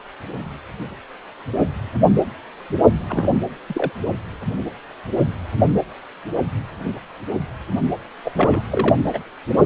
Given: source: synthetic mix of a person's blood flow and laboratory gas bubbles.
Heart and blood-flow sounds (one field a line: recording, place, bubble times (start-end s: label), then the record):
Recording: Doppler ultrasound of blood flow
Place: precordium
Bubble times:
3.08-3.40 s: bubbles
3.68-3.92 s: bubbles
8.24-8.32 s: bubbles
8.36-8.62 s: bubbles
8.71-8.96 s: bubbles
9.13-9.20 s: bubbles
From the record:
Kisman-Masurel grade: 222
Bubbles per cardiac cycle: several, 3 to 8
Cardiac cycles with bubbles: 10 to 50%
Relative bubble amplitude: moderate (0.250 to 0.450)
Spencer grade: 2 (many but less than half of the cardiac periods contain bubble signals, singularly or in groups)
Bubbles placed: only in the low amplitude regions of the cardiac cycle